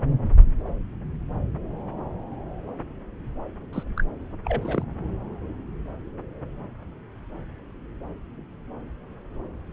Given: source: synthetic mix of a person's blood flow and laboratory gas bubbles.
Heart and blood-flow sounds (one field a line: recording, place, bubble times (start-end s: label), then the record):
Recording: Doppler ultrasound of blood flow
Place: subclavian vein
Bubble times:
3.73-3.83 s: bubbles
3.97-4.03 s: bubbles
4.44-4.83 s: bubbles
From the record:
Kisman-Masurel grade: 211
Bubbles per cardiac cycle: several, 3 to 8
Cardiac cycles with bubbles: 1 to 10%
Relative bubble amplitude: barely perceptible (0.100 to 0.250)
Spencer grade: 1 (occasional bubble signal discernible with the cardiac motion signal, with majority of cardiac periods free of bubbles)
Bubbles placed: anywhere in the cardiac cycle